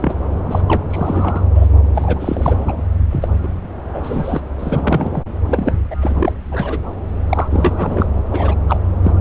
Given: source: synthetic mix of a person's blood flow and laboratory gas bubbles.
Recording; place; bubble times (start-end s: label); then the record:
Doppler ultrasound of blood flow; subclavian vein
0.00-0.14 s: bubbles
0.48-0.61 s: bubbles
0.68-0.84 s: bubbles
0.90-1.45 s: bubbles
1.55-1.68 s: bubbles
1.95-2.75 s: bubbles
3.10-3.29 s: bubbles
3.43-3.48 s: bubbles
3.94-4.41 s: bubbles
4.59-5.22 s: bubbles
5.46-5.73 s: bubbles
5.91-5.96 s: bubbles
6.00-6.33 s: bubbles
6.51-6.79 s: bubbles
7.29-8.06 s: bubbles
8.31-8.54 s: bubbles
8.68-8.79 s: bubbles
9.04-9.12 s: bubbles
From the record:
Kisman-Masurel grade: 342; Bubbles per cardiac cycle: rolling drumbeat, 9 or more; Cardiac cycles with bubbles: 100%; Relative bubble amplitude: moderate (0.250 to 0.450); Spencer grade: 3 (all of the cardiac periods contain showers or single bubble signals, but not dominating or overriding the cardiac motion signals); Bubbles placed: anywhere in the cardiac cycle